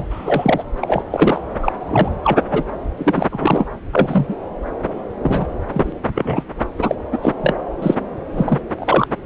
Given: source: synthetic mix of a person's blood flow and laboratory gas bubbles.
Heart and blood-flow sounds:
Doppler ultrasound of blood flow; subclavian vein
0.00-0.06 s: bubbles
0.11-0.64 s: bubbles
0.81-1.03 s: bubbles
1.11-1.40 s: bubbles
1.62-1.72 s: bubbles
1.81-2.15 s: bubbles
2.23-2.38 s: bubbles
2.51-2.65 s: bubbles
2.97-3.27 s: bubbles
3.31-3.67 s: bubbles
3.92-4.36 s: bubbles
5.22-5.46 s: bubbles
5.72-5.92 s: bubbles
6.14-6.43 s: bubbles
6.78-6.96 s: bubbles
7.12-7.18 s: bubbles
7.22-7.33 s: bubbles
7.42-7.56 s: bubbles
7.82-7.95 s: bubbles
8.33-8.59 s: bubbles
8.79-9.09 s: bubbles
From the record:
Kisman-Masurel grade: 243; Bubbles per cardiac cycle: several, 3 to 8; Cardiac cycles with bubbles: 100%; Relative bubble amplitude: loud (0.450 to 0.775); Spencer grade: 3 (all of the cardiac periods contain showers or single bubble signals, but not dominating or overriding the cardiac motion signals); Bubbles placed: anywhere in the cardiac cycle

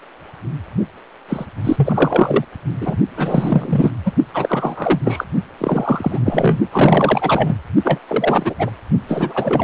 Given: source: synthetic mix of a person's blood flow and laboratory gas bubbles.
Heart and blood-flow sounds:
Doppler ultrasound of blood flow; precordium
1.28-1.45 s: bubbles
1.64-2.45 s: bubbles
2.81-2.97 s: bubbles
3.17-3.90 s: bubbles
4.05-4.12 s: bubbles
4.33-5.01 s: bubbles
5.04-5.25 s: bubbles
5.58-6.19 s: bubbles
6.25-6.59 s: bubbles
6.72-7.56 s: bubbles
7.84-8.00 s: bubbles
8.08-8.54 s: bubbles
8.59-8.71 s: bubbles
9.08-9.64 s: bubbles
From the record:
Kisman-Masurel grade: 333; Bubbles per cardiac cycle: rolling drumbeat, 9 or more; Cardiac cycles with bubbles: 50 to 99%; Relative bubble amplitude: loud (0.450 to 0.775); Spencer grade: 3 (all of the cardiac periods contain showers or single bubble signals, but not dominating or overriding the cardiac motion signals); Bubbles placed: only in the low amplitude regions of the cardiac cycle

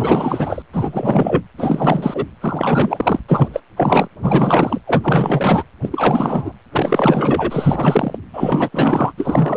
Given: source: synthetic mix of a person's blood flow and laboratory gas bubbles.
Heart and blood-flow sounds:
Doppler ultrasound of blood flow; precordium
0.00-0.62 s: bubbles
0.72-1.42 s: bubbles
1.57-2.25 s: bubbles
2.40-3.20 s: bubbles
3.28-3.60 s: bubbles
3.77-4.08 s: bubbles
4.22-4.80 s: bubbles
4.87-5.64 s: bubbles
5.82-6.53 s: bubbles
6.72-8.17 s: bubbles
8.33-8.69 s: bubbles
8.72-9.12 s: bubbles
9.17-9.56 s: bubbles
From the record:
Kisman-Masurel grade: 444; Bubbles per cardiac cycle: continuous sound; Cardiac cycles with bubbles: 100%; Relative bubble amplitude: maximal (0.775 to 0.999); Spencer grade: 4 (maximum detectable bubble signal sounding continuously throughout systole and diastole of every cardiac period, and overriding the amplitude of the normal cardiac signals); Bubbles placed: anywhere in the cardiac cycle

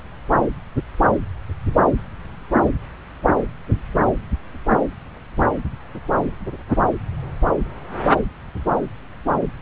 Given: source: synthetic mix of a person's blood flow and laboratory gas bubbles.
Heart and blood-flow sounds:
Doppler ultrasound of blood flow; subclavian vein
no bubbles
From the record:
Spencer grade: 0 (complete lack of bubble signals)

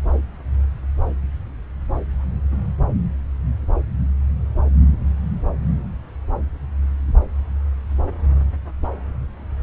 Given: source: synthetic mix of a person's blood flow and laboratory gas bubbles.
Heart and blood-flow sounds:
Doppler ultrasound of blood flow; subclavian vein
no bubbles
From the record:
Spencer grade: 0 (complete lack of bubble signals)

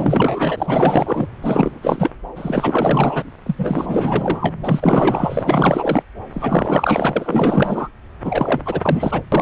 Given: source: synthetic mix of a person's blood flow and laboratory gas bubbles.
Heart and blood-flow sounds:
Doppler ultrasound of blood flow; subclavian vein
0.00-1.27 s: bubbles
1.42-2.12 s: bubbles
2.35-3.23 s: bubbles
3.46-3.55 s: bubbles
3.58-4.54 s: bubbles
4.62-6.03 s: bubbles
6.33-7.88 s: bubbles
8.23-8.61 s: bubbles
8.65-9.21 s: bubbles
9.32-9.42 s: bubbles
From the record:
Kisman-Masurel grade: 444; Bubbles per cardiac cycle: continuous sound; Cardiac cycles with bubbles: 100%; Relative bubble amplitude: maximal (0.775 to 0.999); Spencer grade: 4 (maximum detectable bubble signal sounding continuously throughout systole and diastole of every cardiac period, and overriding the amplitude of the normal cardiac signals); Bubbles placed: anywhere in the cardiac cycle

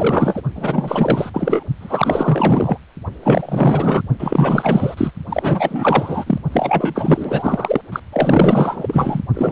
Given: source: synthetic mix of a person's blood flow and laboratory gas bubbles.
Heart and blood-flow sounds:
Doppler ultrasound of blood flow; precordium
0.00-0.42 s: bubbles
0.55-1.30 s: bubbles
1.33-1.64 s: bubbles
1.80-2.78 s: bubbles
3.23-4.02 s: bubbles
4.19-4.94 s: bubbles
4.97-5.11 s: bubbles
5.28-6.38 s: bubbles
6.52-7.81 s: bubbles
7.92-8.00 s: bubbles
8.12-9.21 s: bubbles
9.34-9.52 s: bubbles
From the record:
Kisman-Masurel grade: 444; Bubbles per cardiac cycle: continuous sound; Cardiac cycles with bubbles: 100%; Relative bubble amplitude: maximal (0.775 to 0.999); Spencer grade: 4 (maximum detectable bubble signal sounding continuously throughout systole and diastole of every cardiac period, and overriding the amplitude of the normal cardiac signals); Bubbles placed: only in the low amplitude regions of the cardiac cycle

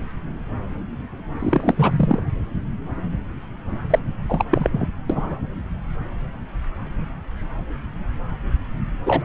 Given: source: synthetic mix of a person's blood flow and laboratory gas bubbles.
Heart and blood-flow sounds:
Doppler ultrasound of blood flow; subclavian vein
1.39-2.20 s: bubbles
3.90-3.99 s: bubbles
4.29-4.46 s: bubbles
4.50-4.69 s: bubbles
4.71-4.87 s: bubbles
5.09-5.37 s: bubbles
9.05-9.25 s: bubbles
From the record:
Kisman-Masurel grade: 223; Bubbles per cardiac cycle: several, 3 to 8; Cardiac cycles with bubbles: 10 to 50%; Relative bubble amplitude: loud (0.450 to 0.775); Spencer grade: 2 (many but less than half of the cardiac periods contain bubble signals, singularly or in groups); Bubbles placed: anywhere in the cardiac cycle

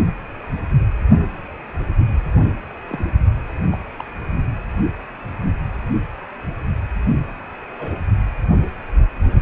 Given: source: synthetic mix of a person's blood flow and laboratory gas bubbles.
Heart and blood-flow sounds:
Doppler ultrasound of blood flow; precordium
2.88-3.05 s: bubbles
3.71-3.77 s: bubbles
3.99-4.04 s: bubbles
7.79-8.02 s: bubbles
From the record:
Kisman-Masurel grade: 121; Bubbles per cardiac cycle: 1 to 2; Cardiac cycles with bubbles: 10 to 50%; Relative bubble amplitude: barely perceptible (0.100 to 0.250); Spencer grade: 2 (many but less than half of the cardiac periods contain bubble signals, singularly or in groups); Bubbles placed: anywhere in the cardiac cycle

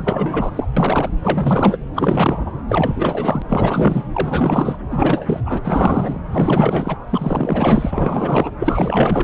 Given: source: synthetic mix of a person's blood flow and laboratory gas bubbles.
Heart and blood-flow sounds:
Doppler ultrasound of blood flow; subclavian vein
0.00-0.66 s: bubbles
0.77-1.09 s: bubbles
1.22-1.78 s: bubbles
1.95-2.52 s: bubbles
2.68-4.04 s: bubbles
4.11-4.77 s: bubbles
4.89-5.41 s: bubbles
5.45-5.61 s: bubbles
5.64-6.21 s: bubbles
6.32-6.98 s: bubbles
7.10-8.51 s: bubbles
8.59-9.24 s: bubbles
From the record:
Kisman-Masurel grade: 444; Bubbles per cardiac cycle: continuous sound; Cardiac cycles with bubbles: 100%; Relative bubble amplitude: maximal (0.775 to 0.999); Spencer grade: 4 (maximum detectable bubble signal sounding continuously throughout systole and diastole of every cardiac period, and overriding the amplitude of the normal cardiac signals); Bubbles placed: anywhere in the cardiac cycle

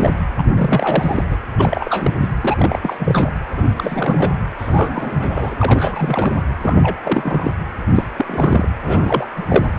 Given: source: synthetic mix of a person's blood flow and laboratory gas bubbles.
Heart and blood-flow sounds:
Doppler ultrasound of blood flow; precordium
0.00-0.10 s: bubbles
0.37-1.25 s: bubbles
1.29-1.37 s: bubbles
1.58-2.12 s: bubbles
2.21-2.28 s: bubbles
2.44-2.79 s: bubbles
2.83-3.30 s: bubbles
3.53-3.73 s: bubbles
3.77-4.33 s: bubbles
4.58-5.55 s: bubbles
5.60-6.34 s: bubbles
6.62-6.96 s: bubbles
7.03-7.51 s: bubbles
7.94-8.04 s: bubbles
8.16-8.68 s: bubbles
8.85-9.27 s: bubbles
9.36-9.45 s: bubbles
9.48-9.71 s: bubbles
From the record:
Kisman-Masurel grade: 342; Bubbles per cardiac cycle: rolling drumbeat, 9 or more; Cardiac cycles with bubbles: 100%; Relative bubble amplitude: moderate (0.250 to 0.450); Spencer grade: 3 (all of the cardiac periods contain showers or single bubble signals, but not dominating or overriding the cardiac motion signals); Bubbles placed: anywhere in the cardiac cycle

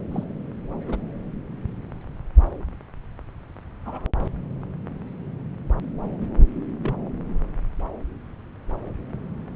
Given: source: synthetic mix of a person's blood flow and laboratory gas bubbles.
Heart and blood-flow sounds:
Doppler ultrasound of blood flow; subclavian vein
0.11-0.24 s: bubbles
0.87-0.97 s: bubbles
3.85-4.11 s: bubbles
6.20-6.26 s: bubbles
6.78-6.94 s: bubbles
From the record:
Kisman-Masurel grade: 121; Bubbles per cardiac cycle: 1 to 2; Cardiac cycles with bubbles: 10 to 50%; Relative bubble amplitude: barely perceptible (0.100 to 0.250); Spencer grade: 2 (many but less than half of the cardiac periods contain bubble signals, singularly or in groups); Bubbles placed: anywhere in the cardiac cycle

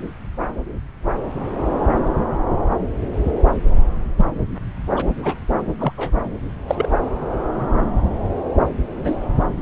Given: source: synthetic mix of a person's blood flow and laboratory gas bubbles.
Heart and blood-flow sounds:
Doppler ultrasound of blood flow; subclavian vein
4.17-4.25 s: bubbles
4.96-5.04 s: bubbles
5.17-5.35 s: bubbles
5.79-5.92 s: bubbles
5.97-6.11 s: bubbles
6.67-6.89 s: bubbles
8.95-9.16 s: bubbles
From the record:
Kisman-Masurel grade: 122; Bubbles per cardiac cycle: 1 to 2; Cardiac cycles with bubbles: 10 to 50%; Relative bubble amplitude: moderate (0.250 to 0.450); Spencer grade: 2 (many but less than half of the cardiac periods contain bubble signals, singularly or in groups); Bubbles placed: anywhere in the cardiac cycle

